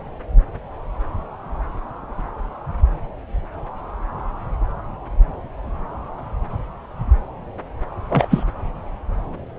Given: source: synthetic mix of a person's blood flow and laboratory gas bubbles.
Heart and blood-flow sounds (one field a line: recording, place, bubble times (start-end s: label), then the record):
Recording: Doppler ultrasound of blood flow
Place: subclavian vein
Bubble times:
8.10-8.26 s: bubbles
8.30-8.43 s: bubbles
From the record:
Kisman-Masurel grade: 213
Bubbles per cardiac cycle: several, 3 to 8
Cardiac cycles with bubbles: 1 to 10%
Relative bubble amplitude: loud (0.450 to 0.775)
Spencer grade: 1 (occasional bubble signal discernible with the cardiac motion signal, with majority of cardiac periods free of bubbles)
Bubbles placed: anywhere in the cardiac cycle